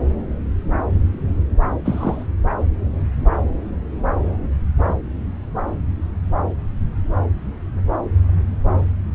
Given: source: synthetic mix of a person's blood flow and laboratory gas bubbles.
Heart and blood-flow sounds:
Doppler ultrasound of blood flow; subclavian vein
1.84-2.25 s: bubbles
From the record:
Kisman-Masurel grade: 113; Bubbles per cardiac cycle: 1 to 2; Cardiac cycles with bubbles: 1 to 10%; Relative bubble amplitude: loud (0.450 to 0.775); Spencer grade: 1 (occasional bubble signal discernible with the cardiac motion signal, with majority of cardiac periods free of bubbles); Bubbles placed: anywhere in the cardiac cycle

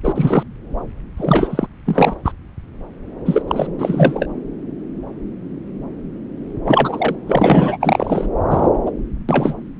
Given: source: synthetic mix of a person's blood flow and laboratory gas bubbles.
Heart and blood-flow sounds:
Doppler ultrasound of blood flow; subclavian vein
0.03-0.43 s: bubbles
1.17-1.67 s: bubbles
1.85-2.15 s: bubbles
2.25-2.32 s: bubbles
3.25-3.42 s: bubbles
3.48-3.67 s: bubbles
3.79-4.26 s: bubbles
6.65-7.16 s: bubbles
7.27-7.77 s: bubbles
7.81-8.27 s: bubbles
8.50-8.70 s: bubbles
8.86-8.90 s: bubbles
9.29-9.54 s: bubbles
From the record:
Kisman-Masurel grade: 233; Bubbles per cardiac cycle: several, 3 to 8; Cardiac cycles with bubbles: 50 to 99%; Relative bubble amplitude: loud (0.450 to 0.775); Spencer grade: 3 (all of the cardiac periods contain showers or single bubble signals, but not dominating or overriding the cardiac motion signals); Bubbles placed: anywhere in the cardiac cycle

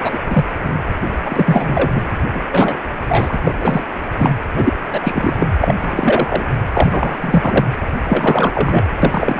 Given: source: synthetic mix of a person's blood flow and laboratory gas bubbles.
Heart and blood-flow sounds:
Doppler ultrasound of blood flow; precordium
0.00-0.18 s: bubbles
0.30-0.51 s: bubbles
0.62-0.78 s: bubbles
1.25-1.92 s: bubbles
1.94-2.02 s: bubbles
2.35-2.41 s: bubbles
2.52-2.76 s: bubbles
3.09-3.38 s: bubbles
3.44-3.54 s: bubbles
3.61-3.85 s: bubbles
4.17-4.35 s: bubbles
4.55-4.77 s: bubbles
4.92-5.35 s: bubbles
5.39-5.48 s: bubbles
5.60-5.75 s: bubbles
5.79-6.44 s: bubbles
6.73-7.17 s: bubbles
7.20-7.65 s: bubbles
8.08-8.51 s: bubbles
8.54-8.84 s: bubbles
9.02-9.40 s: bubbles
From the record:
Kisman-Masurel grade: 343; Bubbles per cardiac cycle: rolling drumbeat, 9 or more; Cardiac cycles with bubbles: 100%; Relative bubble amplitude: loud (0.450 to 0.775); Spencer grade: 3 (all of the cardiac periods contain showers or single bubble signals, but not dominating or overriding the cardiac motion signals); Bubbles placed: anywhere in the cardiac cycle

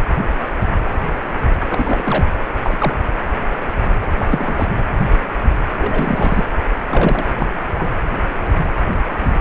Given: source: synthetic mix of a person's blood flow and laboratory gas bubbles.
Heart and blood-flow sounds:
Doppler ultrasound of blood flow; precordium
1.68-2.26 s: bubbles
2.62-2.93 s: bubbles
4.02-4.07 s: bubbles
4.18-4.74 s: bubbles
5.78-6.45 s: bubbles
6.91-7.25 s: bubbles
7.38-7.58 s: bubbles
7.67-8.01 s: bubbles
From the record:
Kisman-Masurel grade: 222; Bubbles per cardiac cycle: several, 3 to 8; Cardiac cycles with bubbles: 10 to 50%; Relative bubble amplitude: moderate (0.250 to 0.450); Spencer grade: 2 (many but less than half of the cardiac periods contain bubble signals, singularly or in groups); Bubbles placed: anywhere in the cardiac cycle

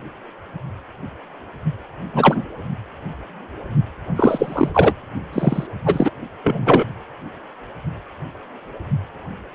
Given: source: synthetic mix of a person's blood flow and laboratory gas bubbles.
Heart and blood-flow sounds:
Doppler ultrasound of blood flow; precordium
2.13-2.46 s: bubbles
4.15-4.70 s: bubbles
4.74-4.93 s: bubbles
5.33-5.67 s: bubbles
5.85-6.11 s: bubbles
6.43-6.84 s: bubbles
From the record:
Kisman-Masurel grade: 223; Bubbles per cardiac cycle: several, 3 to 8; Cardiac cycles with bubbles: 10 to 50%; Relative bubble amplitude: loud (0.450 to 0.775); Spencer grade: 2 (many but less than half of the cardiac periods contain bubble signals, singularly or in groups); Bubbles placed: only in the low amplitude regions of the cardiac cycle

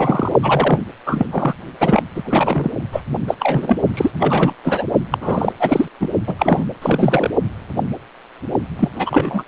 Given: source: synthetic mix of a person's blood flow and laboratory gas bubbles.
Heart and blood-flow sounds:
Doppler ultrasound of blood flow; precordium
0.00-0.34 s: bubbles
0.42-0.88 s: bubbles
1.06-1.26 s: bubbles
1.31-1.54 s: bubbles
1.80-2.02 s: bubbles
2.15-2.71 s: bubbles
2.92-3.01 s: bubbles
3.27-3.34 s: bubbles
3.40-3.78 s: bubbles
3.93-4.10 s: bubbles
4.19-4.53 s: bubbles
4.64-4.84 s: bubbles
5.11-5.18 s: bubbles
5.21-5.53 s: bubbles
5.59-5.85 s: bubbles
6.00-6.09 s: bubbles
6.26-6.34 s: bubbles
6.38-6.66 s: bubbles
6.81-7.30 s: bubbles
8.79-8.89 s: bubbles
8.95-9.44 s: bubbles
From the record:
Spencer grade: 3 (all of the cardiac periods contain showers or single bubble signals, but not dominating or overriding the cardiac motion signals); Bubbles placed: only in the low amplitude regions of the cardiac cycle

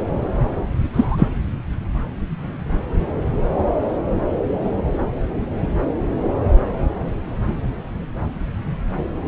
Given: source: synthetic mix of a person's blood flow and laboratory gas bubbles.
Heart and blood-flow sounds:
Doppler ultrasound of blood flow; subclavian vein
0.93-1.28 s: bubbles
From the record:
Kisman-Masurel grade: 223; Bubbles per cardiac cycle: several, 3 to 8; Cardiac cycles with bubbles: 10 to 50%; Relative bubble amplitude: loud (0.450 to 0.775); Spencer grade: 2 (many but less than half of the cardiac periods contain bubble signals, singularly or in groups); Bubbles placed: anywhere in the cardiac cycle

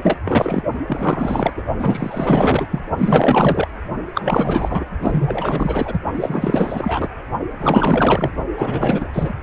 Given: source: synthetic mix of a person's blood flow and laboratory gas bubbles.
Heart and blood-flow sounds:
Doppler ultrasound of blood flow; precordium
0.02-0.19 s: bubbles
0.24-0.63 s: bubbles
0.87-1.53 s: bubbles
1.57-1.63 s: bubbles
1.79-2.67 s: bubbles
2.71-2.80 s: bubbles
2.98-3.67 s: bubbles
4.14-4.84 s: bubbles
4.99-6.00 s: bubbles
6.14-7.09 s: bubbles
7.58-8.31 s: bubbles
8.58-9.08 s: bubbles
9.12-9.33 s: bubbles
From the record:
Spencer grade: 4 (maximum detectable bubble signal sounding continuously throughout systole and diastole of every cardiac period, and overriding the amplitude of the normal cardiac signals); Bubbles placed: only in the low amplitude regions of the cardiac cycle

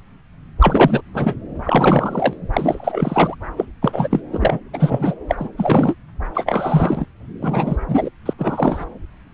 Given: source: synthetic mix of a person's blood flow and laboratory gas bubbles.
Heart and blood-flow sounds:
Doppler ultrasound of blood flow; subclavian vein
0.60-1.01 s: bubbles
1.14-1.35 s: bubbles
1.64-2.37 s: bubbles
2.53-3.35 s: bubbles
3.57-3.65 s: bubbles
3.81-4.21 s: bubbles
4.32-4.58 s: bubbles
4.73-5.14 s: bubbles
5.28-5.48 s: bubbles
5.57-5.94 s: bubbles
6.34-7.05 s: bubbles
7.42-7.77 s: bubbles
7.88-8.10 s: bubbles
8.25-8.33 s: bubbles
8.38-8.85 s: bubbles
From the record:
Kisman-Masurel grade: 333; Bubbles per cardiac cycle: rolling drumbeat, 9 or more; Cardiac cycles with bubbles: 50 to 99%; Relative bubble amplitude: loud (0.450 to 0.775); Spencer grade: 3 (all of the cardiac periods contain showers or single bubble signals, but not dominating or overriding the cardiac motion signals); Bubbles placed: anywhere in the cardiac cycle

